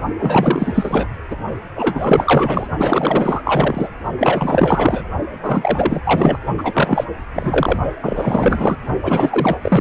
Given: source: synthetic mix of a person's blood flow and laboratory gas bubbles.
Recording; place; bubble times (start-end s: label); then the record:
Doppler ultrasound of blood flow; precordium
0.18-1.08 s: bubbles
1.31-1.36 s: bubbles
1.75-2.67 s: bubbles
2.77-3.89 s: bubbles
4.18-5.04 s: bubbles
5.42-6.00 s: bubbles
6.04-6.38 s: bubbles
6.58-7.04 s: bubbles
7.33-7.79 s: bubbles
8.02-8.77 s: bubbles
9.02-9.57 s: bubbles
9.62-9.81 s: bubbles
From the record:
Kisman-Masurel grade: 444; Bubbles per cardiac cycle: continuous sound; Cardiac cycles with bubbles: 100%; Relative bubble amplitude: maximal (0.775 to 0.999); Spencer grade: 4 (maximum detectable bubble signal sounding continuously throughout systole and diastole of every cardiac period, and overriding the amplitude of the normal cardiac signals); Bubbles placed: only in the low amplitude regions of the cardiac cycle